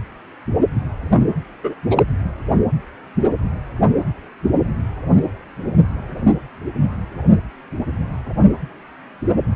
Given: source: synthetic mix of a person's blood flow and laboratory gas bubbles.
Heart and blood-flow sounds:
Doppler ultrasound of blood flow; precordium
1.09-1.22 s: bubbles
1.63-1.75 s: bubbles
1.91-2.03 s: bubbles
From the record:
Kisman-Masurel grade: 213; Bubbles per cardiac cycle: several, 3 to 8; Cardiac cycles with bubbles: 1 to 10%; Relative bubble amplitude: loud (0.450 to 0.775); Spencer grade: 1 (occasional bubble signal discernible with the cardiac motion signal, with majority of cardiac periods free of bubbles); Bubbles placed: anywhere in the cardiac cycle

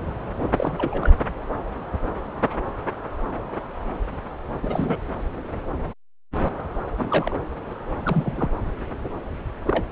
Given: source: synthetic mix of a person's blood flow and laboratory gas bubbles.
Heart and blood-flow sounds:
Doppler ultrasound of blood flow; subclavian vein
0.56-1.14 s: bubbles
4.62-5.00 s: bubbles
6.97-7.35 s: bubbles
8.05-8.51 s: bubbles
9.67-9.87 s: bubbles
From the record:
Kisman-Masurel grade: 221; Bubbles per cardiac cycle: several, 3 to 8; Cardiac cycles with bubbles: 10 to 50%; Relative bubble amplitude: barely perceptible (0.100 to 0.250); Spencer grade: 2 (many but less than half of the cardiac periods contain bubble signals, singularly or in groups); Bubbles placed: anywhere in the cardiac cycle

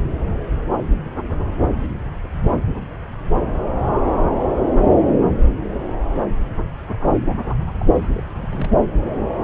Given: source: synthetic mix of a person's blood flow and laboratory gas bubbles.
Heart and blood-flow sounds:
Doppler ultrasound of blood flow; subclavian vein
7.61-7.64 s: bubbles
7.78-7.86 s: bubbles
8.03-8.10 s: bubbles
8.13-8.21 s: bubbles
8.37-8.80 s: bubbles
From the record:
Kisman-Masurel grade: 211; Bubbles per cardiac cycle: several, 3 to 8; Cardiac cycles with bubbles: 1 to 10%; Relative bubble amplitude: barely perceptible (0.100 to 0.250); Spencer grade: 1 (occasional bubble signal discernible with the cardiac motion signal, with majority of cardiac periods free of bubbles); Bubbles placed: anywhere in the cardiac cycle

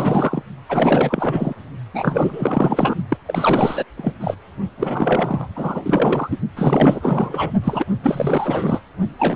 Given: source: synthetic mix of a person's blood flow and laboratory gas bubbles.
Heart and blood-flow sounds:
Doppler ultrasound of blood flow; precordium
0.00-0.42 s: bubbles
0.69-1.54 s: bubbles
1.94-2.95 s: bubbles
3.08-3.17 s: bubbles
3.26-3.84 s: bubbles
3.96-4.12 s: bubbles
4.21-4.36 s: bubbles
4.77-5.47 s: bubbles
5.55-6.38 s: bubbles
6.56-7.51 s: bubbles
7.63-7.86 s: bubbles
8.03-8.81 s: bubbles
9.19-9.36 s: bubbles
From the record:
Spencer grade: 4 (maximum detectable bubble signal sounding continuously throughout systole and diastole of every cardiac period, and overriding the amplitude of the normal cardiac signals); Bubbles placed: only in the low amplitude regions of the cardiac cycle

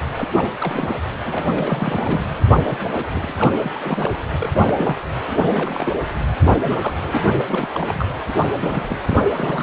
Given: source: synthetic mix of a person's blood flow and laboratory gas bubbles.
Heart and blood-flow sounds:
Doppler ultrasound of blood flow; precordium
0.16-0.29 s: bubbles
0.36-0.48 s: bubbles
0.60-0.94 s: bubbles
1.24-2.25 s: bubbles
2.30-2.38 s: bubbles
2.50-2.78 s: bubbles
2.81-2.90 s: bubbles
2.95-3.08 s: bubbles
3.15-3.54 s: bubbles
3.58-3.71 s: bubbles
3.74-4.11 s: bubbles
4.41-4.50 s: bubbles
4.54-4.96 s: bubbles
5.30-5.36 s: bubbles
5.42-5.93 s: bubbles
6.40-6.56 s: bubbles
6.63-6.94 s: bubbles
6.97-7.26 s: bubbles
7.35-7.42 s: bubbles
7.47-7.69 s: bubbles
7.72-8.06 s: bubbles
8.28-8.33 s: bubbles
8.60-8.98 s: bubbles
9.04-9.23 s: bubbles
9.33-9.63 s: bubbles
From the record:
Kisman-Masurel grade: 332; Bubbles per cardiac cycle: rolling drumbeat, 9 or more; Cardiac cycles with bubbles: 50 to 99%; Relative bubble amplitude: moderate (0.250 to 0.450); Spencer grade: 3 (all of the cardiac periods contain showers or single bubble signals, but not dominating or overriding the cardiac motion signals); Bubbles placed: anywhere in the cardiac cycle

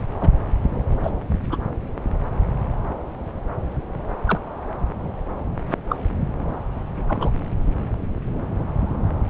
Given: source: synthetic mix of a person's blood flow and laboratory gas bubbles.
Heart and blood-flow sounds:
Doppler ultrasound of blood flow; subclavian vein
0.21-0.29 s: bubbles
1.03-1.11 s: bubbles
1.49-1.58 s: bubbles
4.27-4.39 s: bubbles
5.89-5.96 s: bubbles
7.08-7.30 s: bubbles
9.26-9.30 s: bubbles
From the record:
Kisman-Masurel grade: 122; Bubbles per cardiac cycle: 1 to 2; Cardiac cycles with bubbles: 10 to 50%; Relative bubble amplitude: moderate (0.250 to 0.450); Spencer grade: 2 (many but less than half of the cardiac periods contain bubble signals, singularly or in groups); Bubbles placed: anywhere in the cardiac cycle

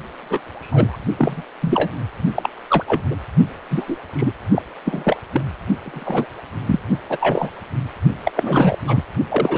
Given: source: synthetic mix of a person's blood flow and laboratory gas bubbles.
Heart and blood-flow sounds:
Doppler ultrasound of blood flow; precordium
0.30-0.41 s: bubbles
0.61-1.00 s: bubbles
1.19-1.43 s: bubbles
1.61-1.90 s: bubbles
2.34-2.49 s: bubbles
2.68-2.83 s: bubbles
2.88-3.02 s: bubbles
3.10-3.16 s: bubbles
3.70-3.97 s: bubbles
4.16-4.32 s: bubbles
4.51-4.62 s: bubbles
4.86-5.17 s: bubbles
5.32-5.42 s: bubbles
5.86-6.26 s: bubbles
6.66-6.79 s: bubbles
7.10-7.17 s: bubbles
7.20-7.50 s: bubbles
8.24-8.31 s: bubbles
8.36-8.78 s: bubbles
8.88-9.03 s: bubbles
9.29-9.58 s: bubbles
From the record:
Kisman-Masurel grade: 242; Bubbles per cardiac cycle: several, 3 to 8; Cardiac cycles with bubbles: 100%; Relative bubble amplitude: moderate (0.250 to 0.450); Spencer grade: 3 (all of the cardiac periods contain showers or single bubble signals, but not dominating or overriding the cardiac motion signals); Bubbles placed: only in the low amplitude regions of the cardiac cycle

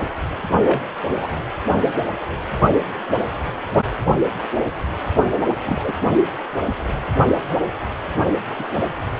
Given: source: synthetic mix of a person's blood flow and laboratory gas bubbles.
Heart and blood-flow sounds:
Doppler ultrasound of blood flow; precordium
0.64-0.80 s: bubbles
1.20-1.28 s: bubbles
5.66-5.92 s: bubbles
8.59-8.71 s: bubbles
From the record:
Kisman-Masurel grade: 122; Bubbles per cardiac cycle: 1 to 2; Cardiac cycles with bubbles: 10 to 50%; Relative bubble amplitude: moderate (0.250 to 0.450); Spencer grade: 2 (many but less than half of the cardiac periods contain bubble signals, singularly or in groups); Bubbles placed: anywhere in the cardiac cycle

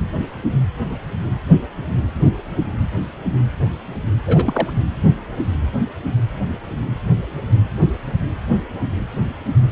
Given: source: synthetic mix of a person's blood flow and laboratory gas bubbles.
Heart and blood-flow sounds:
Doppler ultrasound of blood flow; precordium
4.26-4.73 s: bubbles
From the record:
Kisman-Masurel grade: 212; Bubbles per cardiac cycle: several, 3 to 8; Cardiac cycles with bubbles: 1 to 10%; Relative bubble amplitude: moderate (0.250 to 0.450); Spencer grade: 1 (occasional bubble signal discernible with the cardiac motion signal, with majority of cardiac periods free of bubbles); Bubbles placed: anywhere in the cardiac cycle

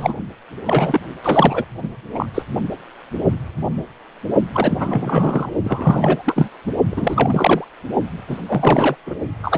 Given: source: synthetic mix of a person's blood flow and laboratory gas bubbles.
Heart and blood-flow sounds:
Doppler ultrasound of blood flow; precordium
0.00-0.15 s: bubbles
0.65-0.99 s: bubbles
1.23-1.65 s: bubbles
1.82-1.88 s: bubbles
2.14-2.26 s: bubbles
2.34-2.42 s: bubbles
4.53-5.50 s: bubbles
5.64-6.49 s: bubbles
6.67-6.72 s: bubbles
6.91-7.64 s: bubbles
8.28-8.38 s: bubbles
8.46-8.96 s: bubbles
9.06-9.15 s: bubbles
9.43-9.58 s: bubbles
From the record:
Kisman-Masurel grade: 333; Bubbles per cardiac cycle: rolling drumbeat, 9 or more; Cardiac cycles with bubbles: 50 to 99%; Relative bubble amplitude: loud (0.450 to 0.775); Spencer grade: 3 (all of the cardiac periods contain showers or single bubble signals, but not dominating or overriding the cardiac motion signals); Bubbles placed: only in the low amplitude regions of the cardiac cycle

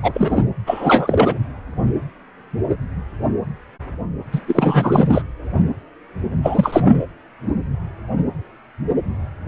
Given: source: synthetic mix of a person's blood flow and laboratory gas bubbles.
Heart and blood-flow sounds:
Doppler ultrasound of blood flow; precordium
0.02-0.44 s: bubbles
0.67-1.38 s: bubbles
4.32-4.41 s: bubbles
4.47-5.22 s: bubbles
6.42-7.07 s: bubbles
From the record:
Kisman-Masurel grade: 223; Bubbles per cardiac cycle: several, 3 to 8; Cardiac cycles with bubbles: 10 to 50%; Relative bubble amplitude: loud (0.450 to 0.775); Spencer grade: 2 (many but less than half of the cardiac periods contain bubble signals, singularly or in groups); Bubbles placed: anywhere in the cardiac cycle

